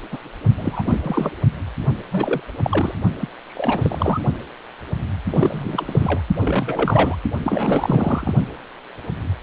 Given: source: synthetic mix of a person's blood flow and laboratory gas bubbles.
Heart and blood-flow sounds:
Doppler ultrasound of blood flow; precordium
0.11-0.19 s: bubbles
0.58-0.82 s: bubbles
0.86-1.30 s: bubbles
2.10-2.41 s: bubbles
2.62-2.95 s: bubbles
3.21-3.29 s: bubbles
3.47-4.21 s: bubbles
5.30-6.21 s: bubbles
6.39-7.16 s: bubbles
7.44-8.34 s: bubbles
From the record:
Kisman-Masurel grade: 332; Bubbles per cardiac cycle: rolling drumbeat, 9 or more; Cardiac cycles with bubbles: 50 to 99%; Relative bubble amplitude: moderate (0.250 to 0.450); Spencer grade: 3 (all of the cardiac periods contain showers or single bubble signals, but not dominating or overriding the cardiac motion signals); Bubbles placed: only in the low amplitude regions of the cardiac cycle

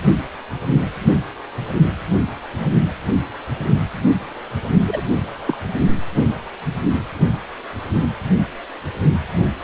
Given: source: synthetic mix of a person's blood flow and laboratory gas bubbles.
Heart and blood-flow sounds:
Doppler ultrasound of blood flow; precordium
4.87-5.01 s: bubbles
5.47-5.58 s: bubbles
From the record:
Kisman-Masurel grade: 113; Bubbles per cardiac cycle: 1 to 2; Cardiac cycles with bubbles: 1 to 10%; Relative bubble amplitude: loud (0.450 to 0.775); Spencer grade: 1 (occasional bubble signal discernible with the cardiac motion signal, with majority of cardiac periods free of bubbles); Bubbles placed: only in the low amplitude regions of the cardiac cycle

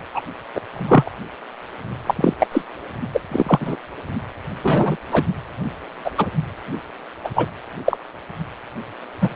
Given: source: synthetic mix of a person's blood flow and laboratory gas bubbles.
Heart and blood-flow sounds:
Doppler ultrasound of blood flow; precordium
0.14-0.20 s: bubbles
0.54-0.61 s: bubbles
0.74-1.10 s: bubbles
2.06-2.33 s: bubbles
2.40-2.47 s: bubbles
2.52-2.62 s: bubbles
3.14-3.21 s: bubbles
3.31-3.76 s: bubbles
4.62-4.97 s: bubbles
5.11-5.24 s: bubbles
6.04-6.11 s: bubbles
6.17-6.27 s: bubbles
7.24-7.29 s: bubbles
7.35-7.46 s: bubbles
7.86-7.97 s: bubbles
9.21-9.30 s: bubbles
From the record:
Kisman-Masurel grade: 243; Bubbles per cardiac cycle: several, 3 to 8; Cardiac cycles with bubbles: 100%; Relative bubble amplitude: loud (0.450 to 0.775); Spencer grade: 3 (all of the cardiac periods contain showers or single bubble signals, but not dominating or overriding the cardiac motion signals); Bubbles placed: anywhere in the cardiac cycle

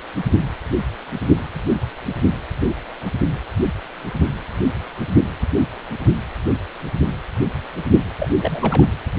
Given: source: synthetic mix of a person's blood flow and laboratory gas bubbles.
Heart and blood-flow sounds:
Doppler ultrasound of blood flow; precordium
8.18-8.28 s: bubbles
8.40-8.88 s: bubbles
From the record:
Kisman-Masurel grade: 211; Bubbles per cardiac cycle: several, 3 to 8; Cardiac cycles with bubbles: 1 to 10%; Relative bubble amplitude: barely perceptible (0.100 to 0.250); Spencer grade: 1 (occasional bubble signal discernible with the cardiac motion signal, with majority of cardiac periods free of bubbles); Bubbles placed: anywhere in the cardiac cycle

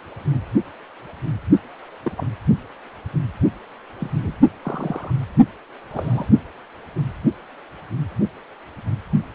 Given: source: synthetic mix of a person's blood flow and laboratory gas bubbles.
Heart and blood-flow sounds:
Doppler ultrasound of blood flow; precordium
2.02-2.12 s: bubbles
2.17-2.27 s: bubbles
4.00-4.11 s: bubbles
4.17-4.33 s: bubbles
4.63-5.12 s: bubbles
5.91-6.28 s: bubbles
6.34-6.41 s: bubbles
From the record:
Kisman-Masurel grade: 121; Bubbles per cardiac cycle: 1 to 2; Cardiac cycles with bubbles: 10 to 50%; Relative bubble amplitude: barely perceptible (0.100 to 0.250); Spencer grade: 2 (many but less than half of the cardiac periods contain bubble signals, singularly or in groups); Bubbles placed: only in the low amplitude regions of the cardiac cycle

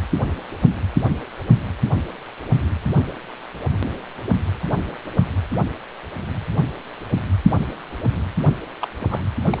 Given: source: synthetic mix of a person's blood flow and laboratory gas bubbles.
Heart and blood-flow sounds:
Doppler ultrasound of blood flow; precordium
8.82-8.86 s: bubbles
9.01-9.22 s: bubbles
9.53-9.60 s: bubbles
From the record:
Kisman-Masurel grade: 121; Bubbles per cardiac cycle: 1 to 2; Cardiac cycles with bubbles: 10 to 50%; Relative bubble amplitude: barely perceptible (0.100 to 0.250); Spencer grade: 2 (many but less than half of the cardiac periods contain bubble signals, singularly or in groups); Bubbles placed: anywhere in the cardiac cycle

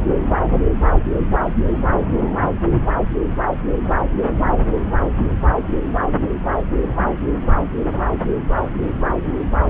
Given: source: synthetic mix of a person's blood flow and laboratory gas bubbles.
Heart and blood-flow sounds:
Doppler ultrasound of blood flow; subclavian vein
no bubbles
From the record:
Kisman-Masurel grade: 000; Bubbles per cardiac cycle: 0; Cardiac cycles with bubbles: 0%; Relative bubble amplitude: no bubbles discernible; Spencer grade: 0 (complete lack of bubble signals)

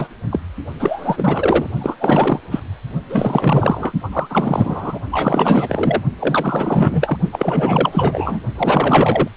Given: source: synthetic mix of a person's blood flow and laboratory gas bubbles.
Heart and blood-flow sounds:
Doppler ultrasound of blood flow; precordium
0.00-0.08 s: bubbles
0.30-0.40 s: bubbles
0.79-1.69 s: bubbles
1.81-1.95 s: bubbles
1.99-2.39 s: bubbles
2.50-2.60 s: bubbles
3.09-3.93 s: bubbles
4.03-4.08 s: bubbles
4.12-4.27 s: bubbles
4.29-5.00 s: bubbles
5.11-6.03 s: bubbles
6.19-7.18 s: bubbles
7.32-8.40 s: bubbles
8.55-9.29 s: bubbles
From the record:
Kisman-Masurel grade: 444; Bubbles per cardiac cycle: continuous sound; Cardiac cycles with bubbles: 100%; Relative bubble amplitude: maximal (0.775 to 0.999); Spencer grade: 4 (maximum detectable bubble signal sounding continuously throughout systole and diastole of every cardiac period, and overriding the amplitude of the normal cardiac signals); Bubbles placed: only in the low amplitude regions of the cardiac cycle

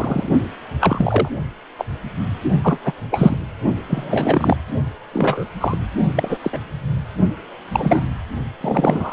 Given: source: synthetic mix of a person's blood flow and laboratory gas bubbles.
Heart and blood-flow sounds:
Doppler ultrasound of blood flow; precordium
0.00-0.30 s: bubbles
0.80-1.28 s: bubbles
1.78-1.85 s: bubbles
2.63-2.79 s: bubbles
2.84-2.92 s: bubbles
3.11-3.37 s: bubbles
3.88-4.56 s: bubbles
5.12-5.45 s: bubbles
5.60-5.78 s: bubbles
6.15-6.38 s: bubbles
6.43-6.60 s: bubbles
7.72-8.04 s: bubbles
8.61-9.13 s: bubbles
From the record:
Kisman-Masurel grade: 243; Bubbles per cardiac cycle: several, 3 to 8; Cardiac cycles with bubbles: 100%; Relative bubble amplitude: loud (0.450 to 0.775); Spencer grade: 3 (all of the cardiac periods contain showers or single bubble signals, but not dominating or overriding the cardiac motion signals); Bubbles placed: only in the low amplitude regions of the cardiac cycle

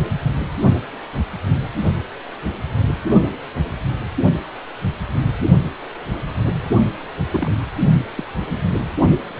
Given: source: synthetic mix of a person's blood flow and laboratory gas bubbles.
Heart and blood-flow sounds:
Doppler ultrasound of blood flow; precordium
7.30-7.55 s: bubbles
8.15-8.23 s: bubbles
8.73-8.89 s: bubbles
From the record:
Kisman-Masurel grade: 121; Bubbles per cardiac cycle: 1 to 2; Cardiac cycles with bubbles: 10 to 50%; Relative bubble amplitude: barely perceptible (0.100 to 0.250); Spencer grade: 2 (many but less than half of the cardiac periods contain bubble signals, singularly or in groups); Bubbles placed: only in the low amplitude regions of the cardiac cycle

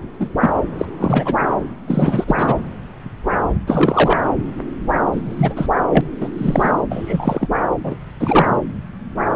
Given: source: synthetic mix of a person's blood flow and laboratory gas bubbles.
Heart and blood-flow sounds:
Doppler ultrasound of blood flow; subclavian vein
0.19-0.29 s: bubbles
0.40-0.50 s: bubbles
0.79-0.85 s: bubbles
1.00-1.34 s: bubbles
1.87-2.24 s: bubbles
2.27-2.54 s: bubbles
3.67-4.21 s: bubbles
5.12-5.66 s: bubbles
5.89-6.01 s: bubbles
6.20-6.29 s: bubbles
6.38-6.71 s: bubbles
6.90-7.47 s: bubbles
7.83-7.96 s: bubbles
8.20-8.48 s: bubbles
From the record:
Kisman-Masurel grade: 233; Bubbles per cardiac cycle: several, 3 to 8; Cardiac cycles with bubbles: 50 to 99%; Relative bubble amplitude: loud (0.450 to 0.775); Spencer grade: 3 (all of the cardiac periods contain showers or single bubble signals, but not dominating or overriding the cardiac motion signals); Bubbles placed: anywhere in the cardiac cycle

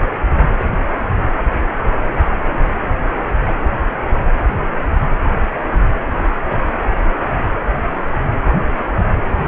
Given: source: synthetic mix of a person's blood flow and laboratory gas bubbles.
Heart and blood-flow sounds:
Doppler ultrasound of blood flow; precordium
no bubbles
From the record:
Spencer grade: 0 (complete lack of bubble signals)

